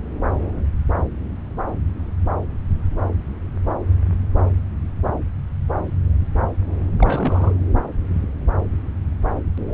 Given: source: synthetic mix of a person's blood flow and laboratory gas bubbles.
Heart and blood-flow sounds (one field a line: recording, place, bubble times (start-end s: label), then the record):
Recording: Doppler ultrasound of blood flow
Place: subclavian vein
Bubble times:
6.92-7.52 s: bubbles
From the record:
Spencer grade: 2 (many but less than half of the cardiac periods contain bubble signals, singularly or in groups)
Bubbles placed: anywhere in the cardiac cycle